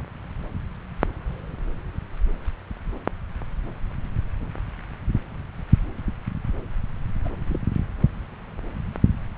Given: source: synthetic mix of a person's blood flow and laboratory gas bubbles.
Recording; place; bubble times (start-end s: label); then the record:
Doppler ultrasound of blood flow; subclavian vein
7.24-7.30 s: bubbles
7.47-7.60 s: bubbles
From the record:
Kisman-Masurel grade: 111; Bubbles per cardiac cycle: 1 to 2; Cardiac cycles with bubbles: 1 to 10%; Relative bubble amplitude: barely perceptible (0.100 to 0.250); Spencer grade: 1 (occasional bubble signal discernible with the cardiac motion signal, with majority of cardiac periods free of bubbles); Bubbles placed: anywhere in the cardiac cycle